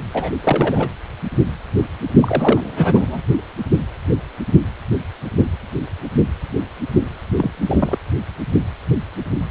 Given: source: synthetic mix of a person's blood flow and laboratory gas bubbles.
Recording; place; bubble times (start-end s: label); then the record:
Doppler ultrasound of blood flow; precordium
0.13-0.31 s: bubbles
0.43-0.88 s: bubbles
2.20-3.21 s: bubbles
7.38-7.50 s: bubbles
7.60-7.97 s: bubbles
From the record:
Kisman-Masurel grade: 222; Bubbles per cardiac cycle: several, 3 to 8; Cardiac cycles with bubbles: 10 to 50%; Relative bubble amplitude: moderate (0.250 to 0.450); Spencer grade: 2 (many but less than half of the cardiac periods contain bubble signals, singularly or in groups); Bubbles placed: anywhere in the cardiac cycle